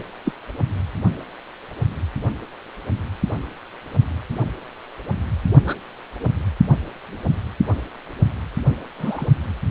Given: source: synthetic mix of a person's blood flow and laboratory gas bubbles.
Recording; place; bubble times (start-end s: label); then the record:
Doppler ultrasound of blood flow; precordium
0.24-0.33 s: bubbles
5.65-5.75 s: bubbles
8.99-9.26 s: bubbles
From the record:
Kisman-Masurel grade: 122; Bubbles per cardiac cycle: 1 to 2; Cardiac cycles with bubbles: 10 to 50%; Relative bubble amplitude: moderate (0.250 to 0.450); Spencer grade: 2 (many but less than half of the cardiac periods contain bubble signals, singularly or in groups); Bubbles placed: only in the low amplitude regions of the cardiac cycle